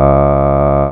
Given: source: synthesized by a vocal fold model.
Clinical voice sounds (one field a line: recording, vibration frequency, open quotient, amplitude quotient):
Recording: sustained vowel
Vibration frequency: 70 Hz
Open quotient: 0.4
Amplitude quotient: 1